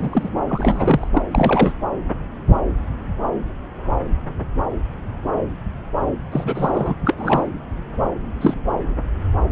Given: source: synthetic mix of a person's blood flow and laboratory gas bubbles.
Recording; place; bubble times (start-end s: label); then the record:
Doppler ultrasound of blood flow; subclavian vein
0.00-0.29 s: bubbles
0.49-1.08 s: bubbles
1.13-1.22 s: bubbles
1.31-1.73 s: bubbles
6.32-6.94 s: bubbles
7.06-7.15 s: bubbles
7.17-7.49 s: bubbles
8.41-8.54 s: bubbles
From the record:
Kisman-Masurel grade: 232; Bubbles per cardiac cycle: several, 3 to 8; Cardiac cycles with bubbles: 50 to 99%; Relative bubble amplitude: moderate (0.250 to 0.450); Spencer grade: 3 (all of the cardiac periods contain showers or single bubble signals, but not dominating or overriding the cardiac motion signals); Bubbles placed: anywhere in the cardiac cycle